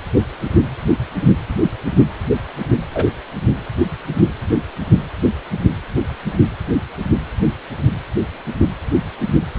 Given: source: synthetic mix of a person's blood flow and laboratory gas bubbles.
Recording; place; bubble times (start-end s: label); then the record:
Doppler ultrasound of blood flow; precordium
2.94-3.12 s: bubbles
From the record:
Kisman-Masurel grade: 113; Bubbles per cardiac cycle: 1 to 2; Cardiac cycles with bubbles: 1 to 10%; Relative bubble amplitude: loud (0.450 to 0.775); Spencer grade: 1 (occasional bubble signal discernible with the cardiac motion signal, with majority of cardiac periods free of bubbles); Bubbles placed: anywhere in the cardiac cycle